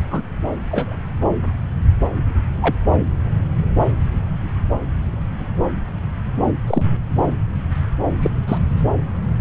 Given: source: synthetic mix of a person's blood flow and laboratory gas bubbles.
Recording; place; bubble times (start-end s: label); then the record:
Doppler ultrasound of blood flow; subclavian vein
0.11-0.22 s: bubbles
0.69-0.95 s: bubbles
2.62-2.76 s: bubbles
6.67-6.86 s: bubbles
8.22-8.30 s: bubbles
8.48-8.58 s: bubbles
From the record:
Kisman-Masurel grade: 122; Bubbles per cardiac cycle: 1 to 2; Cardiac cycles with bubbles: 10 to 50%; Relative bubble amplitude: moderate (0.250 to 0.450); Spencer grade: 2 (many but less than half of the cardiac periods contain bubble signals, singularly or in groups); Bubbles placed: anywhere in the cardiac cycle